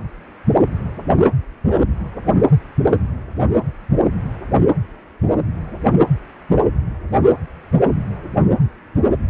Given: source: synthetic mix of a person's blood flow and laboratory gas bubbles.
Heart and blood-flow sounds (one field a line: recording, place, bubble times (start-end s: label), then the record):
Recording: Doppler ultrasound of blood flow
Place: precordium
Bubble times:
1.68-1.75 s: bubbles
From the record:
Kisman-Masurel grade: 112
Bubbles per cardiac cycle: 1 to 2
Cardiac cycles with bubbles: 1 to 10%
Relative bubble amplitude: moderate (0.250 to 0.450)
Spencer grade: 1 (occasional bubble signal discernible with the cardiac motion signal, with majority of cardiac periods free of bubbles)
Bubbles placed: anywhere in the cardiac cycle